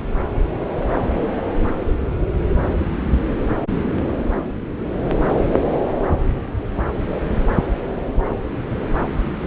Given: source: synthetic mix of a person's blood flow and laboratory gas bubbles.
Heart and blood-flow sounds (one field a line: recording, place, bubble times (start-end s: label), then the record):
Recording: Doppler ultrasound of blood flow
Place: subclavian vein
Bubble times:
no bubbles
From the record:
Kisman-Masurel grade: 000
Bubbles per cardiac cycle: 0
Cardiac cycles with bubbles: 0%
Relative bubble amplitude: no bubbles discernible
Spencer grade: 0 (complete lack of bubble signals)